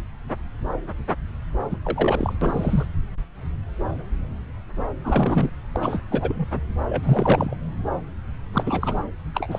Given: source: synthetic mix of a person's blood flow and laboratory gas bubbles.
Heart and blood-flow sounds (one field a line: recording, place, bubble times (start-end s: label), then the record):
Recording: Doppler ultrasound of blood flow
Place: subclavian vein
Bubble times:
1.70-1.77 s: bubbles
1.84-2.33 s: bubbles
2.41-2.85 s: bubbles
5.04-5.50 s: bubbles
5.72-6.02 s: bubbles
6.10-6.46 s: bubbles
6.86-7.55 s: bubbles
8.53-8.63 s: bubbles
8.66-9.00 s: bubbles
9.34-9.59 s: bubbles
From the record:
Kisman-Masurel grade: 332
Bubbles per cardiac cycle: rolling drumbeat, 9 or more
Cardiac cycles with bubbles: 50 to 99%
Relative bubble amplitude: moderate (0.250 to 0.450)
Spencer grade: 3 (all of the cardiac periods contain showers or single bubble signals, but not dominating or overriding the cardiac motion signals)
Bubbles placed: anywhere in the cardiac cycle